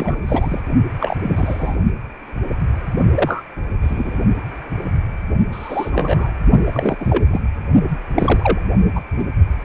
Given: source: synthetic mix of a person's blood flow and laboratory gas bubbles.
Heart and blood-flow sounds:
Doppler ultrasound of blood flow; precordium
0.00-0.61 s: bubbles
1.00-1.17 s: bubbles
1.22-1.77 s: bubbles
3.14-3.42 s: bubbles
3.81-4.20 s: bubbles
5.51-6.31 s: bubbles
6.65-6.96 s: bubbles
6.99-7.25 s: bubbles
7.30-7.40 s: bubbles
8.16-8.60 s: bubbles
8.95-9.02 s: bubbles
9.17-9.26 s: bubbles
From the record:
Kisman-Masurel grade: 232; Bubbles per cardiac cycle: several, 3 to 8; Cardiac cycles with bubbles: 50 to 99%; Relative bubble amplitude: moderate (0.250 to 0.450); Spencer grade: 3 (all of the cardiac periods contain showers or single bubble signals, but not dominating or overriding the cardiac motion signals); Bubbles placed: only in the low amplitude regions of the cardiac cycle

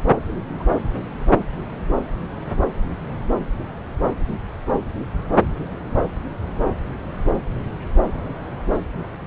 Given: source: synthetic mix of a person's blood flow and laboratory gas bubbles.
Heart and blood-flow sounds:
Doppler ultrasound of blood flow; subclavian vein
0.27-0.33 s: bubbles
0.48-0.63 s: bubbles
From the record:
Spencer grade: 1 (occasional bubble signal discernible with the cardiac motion signal, with majority of cardiac periods free of bubbles); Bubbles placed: anywhere in the cardiac cycle

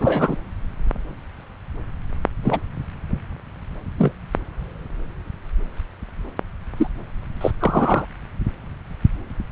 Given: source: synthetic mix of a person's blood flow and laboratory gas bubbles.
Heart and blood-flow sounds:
Doppler ultrasound of blood flow; subclavian vein
0.00-0.36 s: bubbles
2.44-2.60 s: bubbles
3.98-4.12 s: bubbles
6.76-6.87 s: bubbles
7.41-7.51 s: bubbles
7.59-8.05 s: bubbles
From the record:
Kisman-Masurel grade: 123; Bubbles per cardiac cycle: 1 to 2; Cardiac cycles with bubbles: 10 to 50%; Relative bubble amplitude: loud (0.450 to 0.775); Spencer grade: 2 (many but less than half of the cardiac periods contain bubble signals, singularly or in groups); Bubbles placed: anywhere in the cardiac cycle

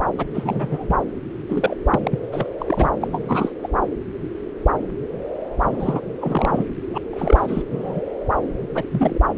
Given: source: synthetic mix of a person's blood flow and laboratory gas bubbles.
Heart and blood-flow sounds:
Doppler ultrasound of blood flow; subclavian vein
0.17-0.26 s: bubbles
0.34-0.97 s: bubbles
1.50-1.76 s: bubbles
1.90-2.20 s: bubbles
2.32-2.46 s: bubbles
2.58-2.88 s: bubbles
3.01-3.07 s: bubbles
3.10-3.53 s: bubbles
3.63-3.68 s: bubbles
5.62-6.00 s: bubbles
6.21-6.65 s: bubbles
6.93-6.98 s: bubbles
7.13-7.62 s: bubbles
7.70-8.01 s: bubbles
8.75-8.84 s: bubbles
8.92-9.19 s: bubbles
From the record:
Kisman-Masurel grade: 232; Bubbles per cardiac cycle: several, 3 to 8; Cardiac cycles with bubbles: 50 to 99%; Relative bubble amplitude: moderate (0.250 to 0.450); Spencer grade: 3 (all of the cardiac periods contain showers or single bubble signals, but not dominating or overriding the cardiac motion signals); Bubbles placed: anywhere in the cardiac cycle

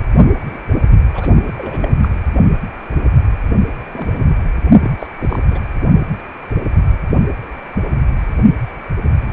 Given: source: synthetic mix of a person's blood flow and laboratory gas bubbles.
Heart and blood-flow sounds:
Doppler ultrasound of blood flow; precordium
0.47-0.58 s: bubbles
1.13-1.55 s: bubbles
1.57-1.89 s: bubbles
2.02-2.08 s: bubbles
3.91-4.37 s: bubbles
4.81-4.92 s: bubbles
4.99-5.07 s: bubbles
5.18-5.39 s: bubbles
5.42-5.63 s: bubbles
From the record:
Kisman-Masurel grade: 221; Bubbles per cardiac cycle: several, 3 to 8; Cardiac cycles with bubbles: 10 to 50%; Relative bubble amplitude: barely perceptible (0.100 to 0.250); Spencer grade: 2 (many but less than half of the cardiac periods contain bubble signals, singularly or in groups); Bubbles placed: only in the low amplitude regions of the cardiac cycle

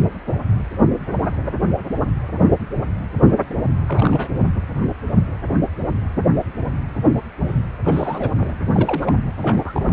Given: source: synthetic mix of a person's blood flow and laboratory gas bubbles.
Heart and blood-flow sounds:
Doppler ultrasound of blood flow; precordium
3.89-4.29 s: bubbles
7.85-8.32 s: bubbles
8.38-8.55 s: bubbles
8.65-9.13 s: bubbles
9.40-9.92 s: bubbles
From the record:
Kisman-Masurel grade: 221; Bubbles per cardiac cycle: several, 3 to 8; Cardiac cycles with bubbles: 10 to 50%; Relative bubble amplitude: barely perceptible (0.100 to 0.250); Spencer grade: 2 (many but less than half of the cardiac periods contain bubble signals, singularly or in groups); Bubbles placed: anywhere in the cardiac cycle

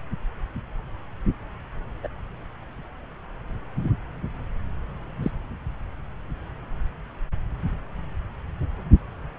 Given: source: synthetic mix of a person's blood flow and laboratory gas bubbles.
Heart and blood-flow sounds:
Doppler ultrasound of blood flow; subclavian vein
2.03-2.08 s: bubbles
5.22-5.31 s: bubbles
From the record:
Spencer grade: 2 (many but less than half of the cardiac periods contain bubble signals, singularly or in groups); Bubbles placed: anywhere in the cardiac cycle

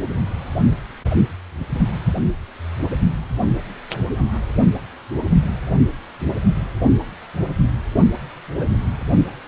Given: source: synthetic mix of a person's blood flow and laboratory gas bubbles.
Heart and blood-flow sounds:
Doppler ultrasound of blood flow; precordium
8.54-8.75 s: bubbles
From the record:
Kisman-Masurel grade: 111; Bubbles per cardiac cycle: 1 to 2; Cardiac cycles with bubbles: 1 to 10%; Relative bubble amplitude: barely perceptible (0.100 to 0.250); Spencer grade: 1 (occasional bubble signal discernible with the cardiac motion signal, with majority of cardiac periods free of bubbles); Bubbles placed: only in the low amplitude regions of the cardiac cycle

